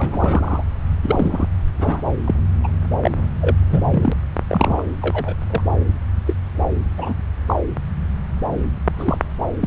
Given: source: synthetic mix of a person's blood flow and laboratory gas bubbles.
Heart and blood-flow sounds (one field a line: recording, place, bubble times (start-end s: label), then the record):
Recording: Doppler ultrasound of blood flow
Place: subclavian vein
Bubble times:
0.00-0.64 s: bubbles
1.03-1.49 s: bubbles
1.79-2.02 s: bubbles
2.24-2.35 s: bubbles
2.63-2.68 s: bubbles
3.03-3.11 s: bubbles
3.41-3.54 s: bubbles
3.70-4.13 s: bubbles
4.49-4.84 s: bubbles
5.01-5.35 s: bubbles
5.50-5.61 s: bubbles
6.25-6.33 s: bubbles
6.97-7.13 s: bubbles
7.47-7.55 s: bubbles
8.54-8.60 s: bubbles
8.96-9.18 s: bubbles
9.61-9.67 s: bubbles
From the record:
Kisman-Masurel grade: 232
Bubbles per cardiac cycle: several, 3 to 8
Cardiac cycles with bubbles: 50 to 99%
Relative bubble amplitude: moderate (0.250 to 0.450)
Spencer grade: 3 (all of the cardiac periods contain showers or single bubble signals, but not dominating or overriding the cardiac motion signals)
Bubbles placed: anywhere in the cardiac cycle